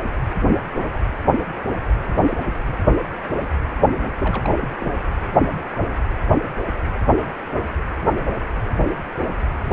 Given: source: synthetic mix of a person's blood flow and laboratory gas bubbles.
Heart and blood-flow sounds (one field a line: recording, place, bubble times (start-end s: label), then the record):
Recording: Doppler ultrasound of blood flow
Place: precordium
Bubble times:
4.18-4.70 s: bubbles
4.80-4.91 s: bubbles
From the record:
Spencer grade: 1 (occasional bubble signal discernible with the cardiac motion signal, with majority of cardiac periods free of bubbles)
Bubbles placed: anywhere in the cardiac cycle